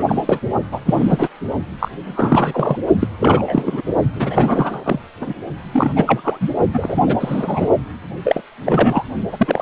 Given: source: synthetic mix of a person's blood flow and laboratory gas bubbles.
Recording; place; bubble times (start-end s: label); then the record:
Doppler ultrasound of blood flow; precordium
0.00-0.03 s: bubbles
0.08-0.22 s: bubbles
0.26-0.40 s: bubbles
0.71-0.80 s: bubbles
0.86-1.28 s: bubbles
1.79-1.89 s: bubbles
2.04-2.77 s: bubbles
3.00-3.08 s: bubbles
3.20-3.82 s: bubbles
4.14-4.99 s: bubbles
5.21-5.33 s: bubbles
5.72-5.90 s: bubbles
5.96-6.37 s: bubbles
6.40-6.48 s: bubbles
6.73-7.03 s: bubbles
7.06-7.67 s: bubbles
8.24-8.41 s: bubbles
8.65-9.04 s: bubbles
9.32-9.62 s: bubbles
From the record:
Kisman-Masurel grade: 343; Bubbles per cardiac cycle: rolling drumbeat, 9 or more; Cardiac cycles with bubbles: 100%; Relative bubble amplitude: loud (0.450 to 0.775); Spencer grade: 3 (all of the cardiac periods contain showers or single bubble signals, but not dominating or overriding the cardiac motion signals); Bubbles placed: only in the low amplitude regions of the cardiac cycle